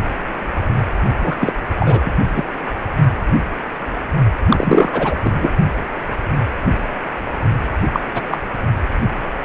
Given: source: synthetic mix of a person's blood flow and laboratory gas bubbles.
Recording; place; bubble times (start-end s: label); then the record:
Doppler ultrasound of blood flow; precordium
1.20-1.35 s: bubbles
1.41-1.55 s: bubbles
1.76-1.99 s: bubbles
2.05-2.11 s: bubbles
2.36-2.44 s: bubbles
4.49-5.16 s: bubbles
5.24-5.50 s: bubbles
7.93-8.00 s: bubbles
8.14-8.22 s: bubbles
8.30-8.38 s: bubbles
From the record:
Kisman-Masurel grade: 233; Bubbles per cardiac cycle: several, 3 to 8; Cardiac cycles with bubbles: 50 to 99%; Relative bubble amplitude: loud (0.450 to 0.775); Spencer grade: 3 (all of the cardiac periods contain showers or single bubble signals, but not dominating or overriding the cardiac motion signals); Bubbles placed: only in the low amplitude regions of the cardiac cycle